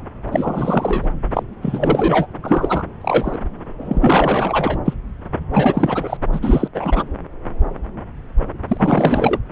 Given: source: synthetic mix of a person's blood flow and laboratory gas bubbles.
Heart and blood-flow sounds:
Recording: Doppler ultrasound of blood flow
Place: subclavian vein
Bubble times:
0.31-1.07 s: bubbles
1.34-1.43 s: bubbles
1.62-2.27 s: bubbles
2.42-2.83 s: bubbles
3.01-3.39 s: bubbles
3.81-4.79 s: bubbles
4.84-4.94 s: bubbles
5.53-6.17 s: bubbles
6.33-6.68 s: bubbles
6.74-7.03 s: bubbles
8.68-9.39 s: bubbles
From the record:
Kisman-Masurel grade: 333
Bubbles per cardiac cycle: rolling drumbeat, 9 or more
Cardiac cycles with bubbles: 50 to 99%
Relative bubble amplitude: loud (0.450 to 0.775)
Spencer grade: 3 (all of the cardiac periods contain showers or single bubble signals, but not dominating or overriding the cardiac motion signals)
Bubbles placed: anywhere in the cardiac cycle

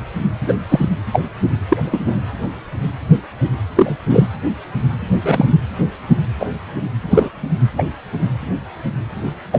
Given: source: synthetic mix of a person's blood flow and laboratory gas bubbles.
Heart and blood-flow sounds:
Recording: Doppler ultrasound of blood flow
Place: precordium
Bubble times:
0.46-0.53 s: bubbles
0.69-0.89 s: bubbles
1.12-1.20 s: bubbles
1.69-1.77 s: bubbles
1.83-2.16 s: bubbles
3.75-3.96 s: bubbles
4.10-4.28 s: bubbles
5.10-5.46 s: bubbles
6.40-6.47 s: bubbles
7.10-7.29 s: bubbles
7.78-7.83 s: bubbles
9.52-9.59 s: bubbles
From the record:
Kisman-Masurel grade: 123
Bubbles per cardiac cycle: 1 to 2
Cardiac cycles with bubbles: 10 to 50%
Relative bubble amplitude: loud (0.450 to 0.775)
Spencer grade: 2 (many but less than half of the cardiac periods contain bubble signals, singularly or in groups)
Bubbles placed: anywhere in the cardiac cycle

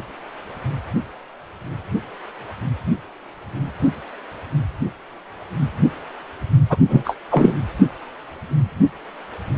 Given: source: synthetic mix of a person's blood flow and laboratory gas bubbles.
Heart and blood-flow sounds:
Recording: Doppler ultrasound of blood flow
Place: precordium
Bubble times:
6.69-6.77 s: bubbles
6.88-7.17 s: bubbles
7.30-7.52 s: bubbles
From the record:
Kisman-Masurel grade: 213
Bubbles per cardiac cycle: several, 3 to 8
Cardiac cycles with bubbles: 1 to 10%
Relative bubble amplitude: loud (0.450 to 0.775)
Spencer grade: 1 (occasional bubble signal discernible with the cardiac motion signal, with majority of cardiac periods free of bubbles)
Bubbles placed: anywhere in the cardiac cycle

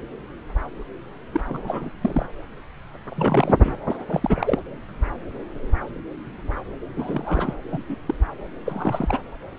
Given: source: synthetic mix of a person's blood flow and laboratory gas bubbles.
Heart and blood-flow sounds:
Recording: Doppler ultrasound of blood flow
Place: subclavian vein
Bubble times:
1.31-1.41 s: bubbles
1.46-1.90 s: bubbles
2.01-2.26 s: bubbles
3.08-3.72 s: bubbles
3.90-3.96 s: bubbles
4.07-4.59 s: bubbles
6.96-7.57 s: bubbles
7.71-7.83 s: bubbles
7.88-7.96 s: bubbles
8.05-8.14 s: bubbles
8.65-9.19 s: bubbles
From the record:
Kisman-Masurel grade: 222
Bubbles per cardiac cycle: several, 3 to 8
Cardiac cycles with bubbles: 10 to 50%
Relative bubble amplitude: moderate (0.250 to 0.450)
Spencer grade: 2 (many but less than half of the cardiac periods contain bubble signals, singularly or in groups)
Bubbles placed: anywhere in the cardiac cycle

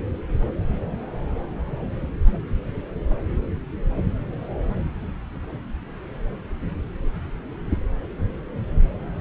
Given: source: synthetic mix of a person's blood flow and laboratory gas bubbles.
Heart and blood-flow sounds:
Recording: Doppler ultrasound of blood flow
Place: subclavian vein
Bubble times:
no bubbles
From the record:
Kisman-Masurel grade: 000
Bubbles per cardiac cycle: 0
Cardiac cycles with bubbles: 0%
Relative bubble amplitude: no bubbles discernible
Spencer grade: 0 (complete lack of bubble signals)

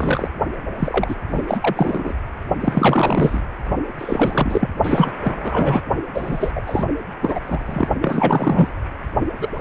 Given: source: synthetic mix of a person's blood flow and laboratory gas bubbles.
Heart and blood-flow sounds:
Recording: Doppler ultrasound of blood flow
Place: precordium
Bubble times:
0.00-0.30 s: bubbles
0.78-1.15 s: bubbles
1.29-1.44 s: bubbles
1.47-2.13 s: bubbles
2.60-3.42 s: bubbles
3.98-4.70 s: bubbles
4.84-5.11 s: bubbles
5.23-5.81 s: bubbles
6.14-6.52 s: bubbles
6.55-6.62 s: bubbles
6.66-6.85 s: bubbles
7.22-7.40 s: bubbles
7.45-7.89 s: bubbles
8.01-8.68 s: bubbles
9.40-9.61 s: bubbles
From the record:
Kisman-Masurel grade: 343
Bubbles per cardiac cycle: rolling drumbeat, 9 or more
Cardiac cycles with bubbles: 100%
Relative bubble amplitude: loud (0.450 to 0.775)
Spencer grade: 3 (all of the cardiac periods contain showers or single bubble signals, but not dominating or overriding the cardiac motion signals)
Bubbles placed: only in the low amplitude regions of the cardiac cycle

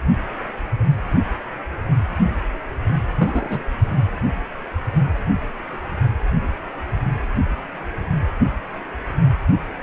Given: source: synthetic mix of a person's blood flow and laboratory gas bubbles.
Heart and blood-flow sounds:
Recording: Doppler ultrasound of blood flow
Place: precordium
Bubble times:
3.19-3.63 s: bubbles
From the record:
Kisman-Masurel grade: 112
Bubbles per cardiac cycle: 1 to 2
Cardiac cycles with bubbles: 1 to 10%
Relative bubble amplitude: moderate (0.250 to 0.450)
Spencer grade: 1 (occasional bubble signal discernible with the cardiac motion signal, with majority of cardiac periods free of bubbles)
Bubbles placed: only in the low amplitude regions of the cardiac cycle

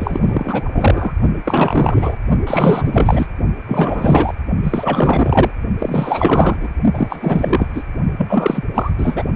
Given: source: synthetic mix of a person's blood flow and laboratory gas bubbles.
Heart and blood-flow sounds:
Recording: Doppler ultrasound of blood flow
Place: precordium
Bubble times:
0.00-1.12 s: bubbles
1.45-2.19 s: bubbles
2.46-3.28 s: bubbles
3.67-4.34 s: bubbles
4.63-5.52 s: bubbles
5.79-6.70 s: bubbles
6.93-7.83 s: bubbles
8.17-8.65 s: bubbles
8.74-8.91 s: bubbles
8.98-9.24 s: bubbles
From the record:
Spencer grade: 4 (maximum detectable bubble signal sounding continuously throughout systole and diastole of every cardiac period, and overriding the amplitude of the normal cardiac signals)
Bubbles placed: only in the low amplitude regions of the cardiac cycle

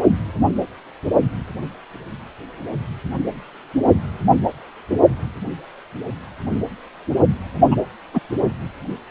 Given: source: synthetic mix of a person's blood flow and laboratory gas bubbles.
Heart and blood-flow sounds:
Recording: Doppler ultrasound of blood flow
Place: precordium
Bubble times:
7.71-7.75 s: bubbles
8.13-8.20 s: bubbles
From the record:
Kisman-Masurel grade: 112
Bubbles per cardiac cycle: 1 to 2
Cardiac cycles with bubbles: 1 to 10%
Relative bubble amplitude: moderate (0.250 to 0.450)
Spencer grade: 1 (occasional bubble signal discernible with the cardiac motion signal, with majority of cardiac periods free of bubbles)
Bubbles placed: only in the low amplitude regions of the cardiac cycle

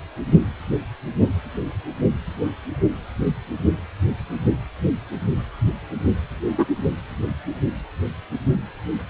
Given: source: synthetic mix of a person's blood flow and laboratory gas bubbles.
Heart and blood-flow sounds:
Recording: Doppler ultrasound of blood flow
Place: precordium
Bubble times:
6.58-6.66 s: bubbles
From the record:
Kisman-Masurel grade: 113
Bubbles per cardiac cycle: 1 to 2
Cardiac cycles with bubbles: 1 to 10%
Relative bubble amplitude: loud (0.450 to 0.775)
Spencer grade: 1 (occasional bubble signal discernible with the cardiac motion signal, with majority of cardiac periods free of bubbles)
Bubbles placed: anywhere in the cardiac cycle

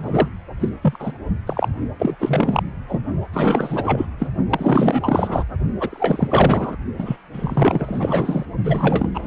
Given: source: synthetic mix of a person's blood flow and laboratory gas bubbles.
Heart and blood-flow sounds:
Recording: Doppler ultrasound of blood flow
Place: precordium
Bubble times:
0.00-0.28 s: bubbles
0.59-0.69 s: bubbles
0.82-1.12 s: bubbles
1.47-1.69 s: bubbles
1.98-2.16 s: bubbles
2.19-2.63 s: bubbles
2.88-3.00 s: bubbles
3.32-4.06 s: bubbles
4.18-4.28 s: bubbles
4.49-5.46 s: bubbles
5.80-6.77 s: bubbles
6.98-7.16 s: bubbles
7.32-8.46 s: bubbles
8.64-9.09 s: bubbles
9.14-9.27 s: bubbles
From the record:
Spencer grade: 4 (maximum detectable bubble signal sounding continuously throughout systole and diastole of every cardiac period, and overriding the amplitude of the normal cardiac signals)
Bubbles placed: only in the low amplitude regions of the cardiac cycle

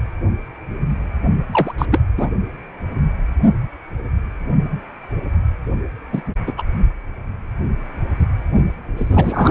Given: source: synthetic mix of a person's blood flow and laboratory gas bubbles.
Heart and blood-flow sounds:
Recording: Doppler ultrasound of blood flow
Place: precordium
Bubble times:
1.51-1.74 s: bubbles
1.78-1.86 s: bubbles
1.92-2.01 s: bubbles
2.17-2.31 s: bubbles
6.12-6.21 s: bubbles
6.46-6.52 s: bubbles
6.58-6.62 s: bubbles
8.96-9.51 s: bubbles
From the record:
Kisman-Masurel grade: 223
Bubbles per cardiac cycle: several, 3 to 8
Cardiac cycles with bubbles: 10 to 50%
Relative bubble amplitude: loud (0.450 to 0.775)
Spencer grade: 2 (many but less than half of the cardiac periods contain bubble signals, singularly or in groups)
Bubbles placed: only in the low amplitude regions of the cardiac cycle

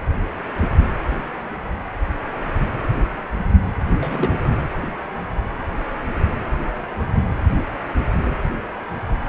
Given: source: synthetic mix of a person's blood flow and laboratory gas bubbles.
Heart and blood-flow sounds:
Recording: Doppler ultrasound of blood flow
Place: precordium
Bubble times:
3.97-4.49 s: bubbles
From the record:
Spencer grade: 1 (occasional bubble signal discernible with the cardiac motion signal, with majority of cardiac periods free of bubbles)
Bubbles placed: anywhere in the cardiac cycle

